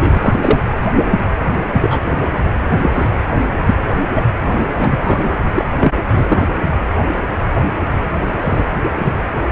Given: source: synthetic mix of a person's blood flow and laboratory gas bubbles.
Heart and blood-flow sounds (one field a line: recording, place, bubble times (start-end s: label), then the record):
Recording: Doppler ultrasound of blood flow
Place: precordium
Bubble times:
0.00-0.59 s: bubbles
1.72-2.00 s: bubbles
2.10-2.16 s: bubbles
2.69-2.90 s: bubbles
2.93-3.10 s: bubbles
3.66-3.74 s: bubbles
4.16-4.23 s: bubbles
4.78-5.31 s: bubbles
5.54-5.65 s: bubbles
5.79-5.92 s: bubbles
6.10-6.49 s: bubbles
8.42-8.65 s: bubbles
8.94-9.13 s: bubbles
From the record:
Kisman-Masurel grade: 233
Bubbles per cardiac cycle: several, 3 to 8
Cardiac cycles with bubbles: 50 to 99%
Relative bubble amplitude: loud (0.450 to 0.775)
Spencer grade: 3 (all of the cardiac periods contain showers or single bubble signals, but not dominating or overriding the cardiac motion signals)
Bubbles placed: anywhere in the cardiac cycle